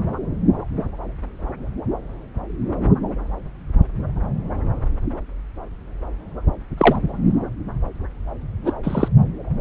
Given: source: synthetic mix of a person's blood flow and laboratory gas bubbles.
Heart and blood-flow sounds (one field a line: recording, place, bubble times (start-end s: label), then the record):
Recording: Doppler ultrasound of blood flow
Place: subclavian vein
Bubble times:
6.77-6.96 s: bubbles
8.65-8.72 s: bubbles
8.83-9.08 s: bubbles
From the record:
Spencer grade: 2 (many but less than half of the cardiac periods contain bubble signals, singularly or in groups)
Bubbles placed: anywhere in the cardiac cycle